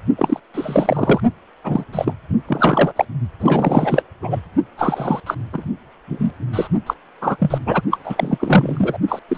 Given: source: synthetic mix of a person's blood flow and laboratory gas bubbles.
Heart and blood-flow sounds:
Doppler ultrasound of blood flow; precordium
0.18-0.40 s: bubbles
0.54-1.20 s: bubbles
1.64-1.85 s: bubbles
1.92-2.15 s: bubbles
2.48-3.05 s: bubbles
3.40-4.02 s: bubbles
4.22-4.41 s: bubbles
4.76-5.20 s: bubbles
5.26-5.34 s: bubbles
5.52-5.65 s: bubbles
6.07-6.31 s: bubbles
6.52-6.68 s: bubbles
6.86-6.94 s: bubbles
7.21-7.36 s: bubbles
7.39-7.58 s: bubbles
7.65-7.81 s: bubbles
7.90-7.98 s: bubbles
8.04-8.97 s: bubbles
9.08-9.20 s: bubbles
9.29-9.38 s: bubbles
From the record:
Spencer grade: 3 (all of the cardiac periods contain showers or single bubble signals, but not dominating or overriding the cardiac motion signals); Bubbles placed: only in the low amplitude regions of the cardiac cycle

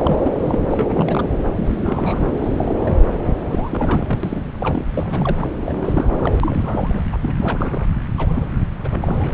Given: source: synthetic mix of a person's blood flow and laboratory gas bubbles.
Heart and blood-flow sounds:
Doppler ultrasound of blood flow; subclavian vein
0.00-0.59 s: bubbles
0.70-1.25 s: bubbles
1.56-2.29 s: bubbles
2.38-2.98 s: bubbles
3.25-3.33 s: bubbles
3.49-4.42 s: bubbles
4.54-4.85 s: bubbles
4.95-5.48 s: bubbles
5.66-5.73 s: bubbles
5.75-6.33 s: bubbles
6.41-7.01 s: bubbles
7.12-7.16 s: bubbles
7.21-7.33 s: bubbles
7.38-7.87 s: bubbles
8.17-8.64 s: bubbles
8.84-9.29 s: bubbles
From the record:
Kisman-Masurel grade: 332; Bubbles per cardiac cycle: rolling drumbeat, 9 or more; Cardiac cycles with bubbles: 50 to 99%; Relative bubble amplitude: moderate (0.250 to 0.450); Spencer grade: 3 (all of the cardiac periods contain showers or single bubble signals, but not dominating or overriding the cardiac motion signals); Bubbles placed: anywhere in the cardiac cycle

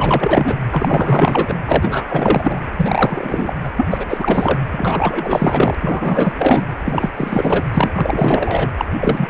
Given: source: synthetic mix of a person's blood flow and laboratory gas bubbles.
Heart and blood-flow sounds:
Doppler ultrasound of blood flow; precordium
0.00-0.56 s: bubbles
0.71-1.57 s: bubbles
1.66-2.05 s: bubbles
2.08-2.60 s: bubbles
2.77-3.54 s: bubbles
3.63-3.69 s: bubbles
3.76-3.87 s: bubbles
3.90-4.05 s: bubbles
4.09-4.58 s: bubbles
4.71-5.75 s: bubbles
5.80-6.33 s: bubbles
6.38-6.63 s: bubbles
6.84-7.11 s: bubbles
7.17-7.64 s: bubbles
7.74-7.90 s: bubbles
7.96-8.69 s: bubbles
8.77-8.85 s: bubbles
8.99-9.30 s: bubbles
From the record:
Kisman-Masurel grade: 444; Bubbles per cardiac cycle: continuous sound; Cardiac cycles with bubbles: 100%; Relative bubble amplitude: maximal (0.775 to 0.999); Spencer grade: 4 (maximum detectable bubble signal sounding continuously throughout systole and diastole of every cardiac period, and overriding the amplitude of the normal cardiac signals); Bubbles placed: anywhere in the cardiac cycle

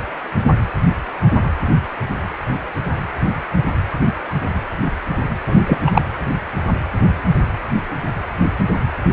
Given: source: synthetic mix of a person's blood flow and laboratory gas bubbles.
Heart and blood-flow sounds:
Doppler ultrasound of blood flow; precordium
5.47-5.59 s: bubbles
5.67-5.79 s: bubbles
5.86-6.01 s: bubbles
From the record:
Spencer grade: 1 (occasional bubble signal discernible with the cardiac motion signal, with majority of cardiac periods free of bubbles); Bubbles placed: anywhere in the cardiac cycle

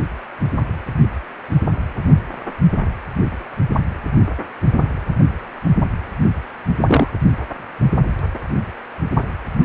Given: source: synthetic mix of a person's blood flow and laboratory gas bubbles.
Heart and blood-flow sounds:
Doppler ultrasound of blood flow; precordium
6.81-7.07 s: bubbles
From the record:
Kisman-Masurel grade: 113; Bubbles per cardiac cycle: 1 to 2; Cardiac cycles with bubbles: 1 to 10%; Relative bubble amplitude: loud (0.450 to 0.775); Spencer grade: 1 (occasional bubble signal discernible with the cardiac motion signal, with majority of cardiac periods free of bubbles); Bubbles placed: anywhere in the cardiac cycle

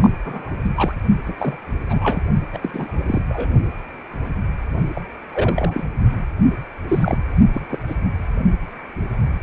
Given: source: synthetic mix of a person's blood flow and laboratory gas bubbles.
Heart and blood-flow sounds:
Doppler ultrasound of blood flow; precordium
0.00-0.10 s: bubbles
0.25-0.54 s: bubbles
0.62-0.71 s: bubbles
0.76-0.94 s: bubbles
1.26-1.33 s: bubbles
1.38-1.57 s: bubbles
1.89-2.23 s: bubbles
2.53-2.58 s: bubbles
2.61-2.70 s: bubbles
2.73-3.00 s: bubbles
3.07-3.22 s: bubbles
3.29-3.52 s: bubbles
4.95-5.01 s: bubbles
5.33-5.90 s: bubbles
6.88-7.18 s: bubbles
7.53-7.66 s: bubbles
7.69-7.79 s: bubbles
7.87-7.96 s: bubbles
From the record:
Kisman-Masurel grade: 232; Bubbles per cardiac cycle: several, 3 to 8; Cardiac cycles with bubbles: 50 to 99%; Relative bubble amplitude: moderate (0.250 to 0.450); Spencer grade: 3 (all of the cardiac periods contain showers or single bubble signals, but not dominating or overriding the cardiac motion signals); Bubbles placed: only in the low amplitude regions of the cardiac cycle

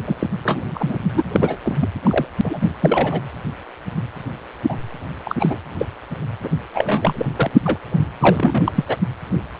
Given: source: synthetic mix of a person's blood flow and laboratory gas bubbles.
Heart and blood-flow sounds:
Doppler ultrasound of blood flow; precordium
0.06-0.16 s: bubbles
0.19-0.28 s: bubbles
0.43-0.62 s: bubbles
0.74-0.97 s: bubbles
1.13-1.23 s: bubbles
1.32-1.57 s: bubbles
1.62-1.77 s: bubbles
1.81-1.89 s: bubbles
2.03-2.27 s: bubbles
2.44-2.69 s: bubbles
2.82-3.21 s: bubbles
4.69-4.76 s: bubbles
5.24-5.36 s: bubbles
5.40-5.58 s: bubbles
5.78-5.86 s: bubbles
6.43-6.49 s: bubbles
6.75-7.25 s: bubbles
7.36-7.51 s: bubbles
7.65-7.78 s: bubbles
8.20-8.72 s: bubbles
8.75-8.85 s: bubbles
8.88-8.96 s: bubbles
From the record:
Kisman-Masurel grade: 232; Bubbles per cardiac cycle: several, 3 to 8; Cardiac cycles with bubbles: 50 to 99%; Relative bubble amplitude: moderate (0.250 to 0.450); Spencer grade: 3 (all of the cardiac periods contain showers or single bubble signals, but not dominating or overriding the cardiac motion signals); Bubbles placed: only in the low amplitude regions of the cardiac cycle

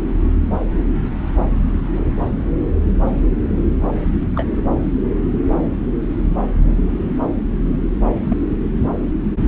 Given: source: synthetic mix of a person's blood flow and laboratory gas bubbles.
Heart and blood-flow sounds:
Doppler ultrasound of blood flow; subclavian vein
4.36-4.46 s: bubbles
8.28-8.37 s: bubbles
From the record:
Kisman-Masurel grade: 122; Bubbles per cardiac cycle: 1 to 2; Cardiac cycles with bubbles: 10 to 50%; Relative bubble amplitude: moderate (0.250 to 0.450); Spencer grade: 2 (many but less than half of the cardiac periods contain bubble signals, singularly or in groups); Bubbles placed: anywhere in the cardiac cycle

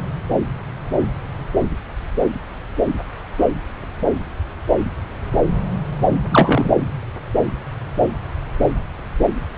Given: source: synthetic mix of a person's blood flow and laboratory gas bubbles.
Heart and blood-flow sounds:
Doppler ultrasound of blood flow; subclavian vein
6.30-6.71 s: bubbles
From the record:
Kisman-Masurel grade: 213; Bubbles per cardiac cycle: several, 3 to 8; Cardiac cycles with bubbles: 1 to 10%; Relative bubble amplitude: loud (0.450 to 0.775); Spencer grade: 1 (occasional bubble signal discernible with the cardiac motion signal, with majority of cardiac periods free of bubbles); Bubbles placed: anywhere in the cardiac cycle

